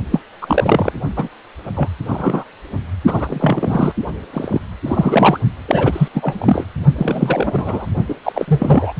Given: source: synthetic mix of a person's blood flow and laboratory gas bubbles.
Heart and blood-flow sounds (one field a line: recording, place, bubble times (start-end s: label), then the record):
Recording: Doppler ultrasound of blood flow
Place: precordium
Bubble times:
0.11-0.21 s: bubbles
0.42-0.93 s: bubbles
1.16-1.28 s: bubbles
1.75-1.89 s: bubbles
2.08-2.44 s: bubbles
3.06-3.93 s: bubbles
4.33-4.61 s: bubbles
4.85-5.40 s: bubbles
5.68-6.08 s: bubbles
6.14-6.66 s: bubbles
6.96-7.86 s: bubbles
8.08-8.15 s: bubbles
8.23-8.45 s: bubbles
8.47-8.92 s: bubbles
From the record:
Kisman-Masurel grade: 243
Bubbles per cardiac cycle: several, 3 to 8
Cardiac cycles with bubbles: 100%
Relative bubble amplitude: loud (0.450 to 0.775)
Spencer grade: 3 (all of the cardiac periods contain showers or single bubble signals, but not dominating or overriding the cardiac motion signals)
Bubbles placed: only in the low amplitude regions of the cardiac cycle